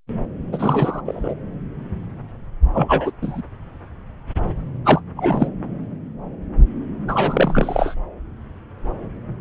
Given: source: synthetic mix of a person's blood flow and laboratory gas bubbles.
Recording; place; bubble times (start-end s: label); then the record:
Doppler ultrasound of blood flow; subclavian vein
0.52-1.01 s: bubbles
1.05-1.34 s: bubbles
2.73-3.11 s: bubbles
3.21-3.42 s: bubbles
4.85-5.01 s: bubbles
5.16-5.49 s: bubbles
7.08-7.95 s: bubbles
From the record:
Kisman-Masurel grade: 223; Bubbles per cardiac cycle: several, 3 to 8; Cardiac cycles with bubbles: 10 to 50%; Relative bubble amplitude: loud (0.450 to 0.775); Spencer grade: 2 (many but less than half of the cardiac periods contain bubble signals, singularly or in groups); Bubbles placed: anywhere in the cardiac cycle